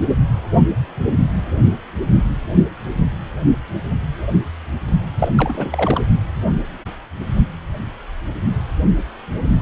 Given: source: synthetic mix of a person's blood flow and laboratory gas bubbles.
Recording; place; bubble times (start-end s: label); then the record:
Doppler ultrasound of blood flow; precordium
5.18-5.28 s: bubbles
5.37-6.02 s: bubbles
From the record:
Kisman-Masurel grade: 212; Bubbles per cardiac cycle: several, 3 to 8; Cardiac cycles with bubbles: 1 to 10%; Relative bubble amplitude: moderate (0.250 to 0.450); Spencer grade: 1 (occasional bubble signal discernible with the cardiac motion signal, with majority of cardiac periods free of bubbles); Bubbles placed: anywhere in the cardiac cycle